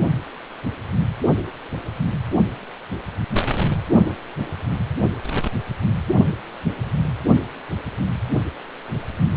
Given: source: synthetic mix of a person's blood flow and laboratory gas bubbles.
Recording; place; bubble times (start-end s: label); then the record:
Doppler ultrasound of blood flow; precordium
8.88-8.97 s: bubbles
From the record:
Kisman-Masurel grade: 111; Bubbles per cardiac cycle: 1 to 2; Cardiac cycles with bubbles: 1 to 10%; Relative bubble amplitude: barely perceptible (0.100 to 0.250); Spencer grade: 1 (occasional bubble signal discernible with the cardiac motion signal, with majority of cardiac periods free of bubbles); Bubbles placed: anywhere in the cardiac cycle